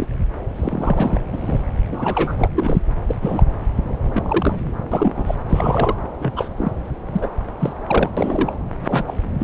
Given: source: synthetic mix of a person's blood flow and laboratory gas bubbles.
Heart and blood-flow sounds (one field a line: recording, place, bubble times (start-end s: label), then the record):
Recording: Doppler ultrasound of blood flow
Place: subclavian vein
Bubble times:
0.00-0.08 s: bubbles
0.56-1.21 s: bubbles
1.32-1.64 s: bubbles
1.92-2.35 s: bubbles
2.38-2.49 s: bubbles
2.56-2.79 s: bubbles
3.06-3.15 s: bubbles
3.21-3.43 s: bubbles
4.09-4.73 s: bubbles
4.92-5.34 s: bubbles
5.48-5.96 s: bubbles
6.20-6.33 s: bubbles
6.36-6.50 s: bubbles
6.57-6.72 s: bubbles
7.13-7.28 s: bubbles
7.60-7.72 s: bubbles
7.87-8.13 s: bubbles
8.16-8.54 s: bubbles
8.86-9.04 s: bubbles
9.07-9.13 s: bubbles
9.39-9.44 s: bubbles
From the record:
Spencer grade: 3 (all of the cardiac periods contain showers or single bubble signals, but not dominating or overriding the cardiac motion signals)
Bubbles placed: anywhere in the cardiac cycle